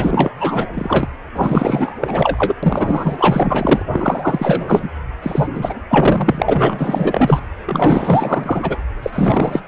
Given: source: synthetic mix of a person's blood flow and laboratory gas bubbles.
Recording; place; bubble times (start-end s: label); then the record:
Doppler ultrasound of blood flow; precordium
0.00-0.32 s: bubbles
0.40-0.67 s: bubbles
0.76-1.08 s: bubbles
1.35-1.97 s: bubbles
2.01-2.54 s: bubbles
2.62-3.83 s: bubbles
3.90-4.88 s: bubbles
5.22-5.49 s: bubbles
5.54-5.75 s: bubbles
5.89-7.39 s: bubbles
7.65-8.78 s: bubbles
9.02-9.60 s: bubbles
From the record:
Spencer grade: 4 (maximum detectable bubble signal sounding continuously throughout systole and diastole of every cardiac period, and overriding the amplitude of the normal cardiac signals); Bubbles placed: anywhere in the cardiac cycle